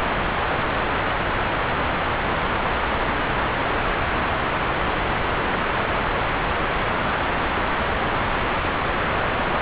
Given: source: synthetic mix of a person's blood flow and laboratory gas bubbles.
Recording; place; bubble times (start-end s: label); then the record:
Doppler ultrasound of blood flow; subclavian vein
no bubbles
From the record:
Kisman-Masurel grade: 000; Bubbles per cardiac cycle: 0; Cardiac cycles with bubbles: 0%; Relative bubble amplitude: no bubbles discernible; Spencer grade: 0 (complete lack of bubble signals)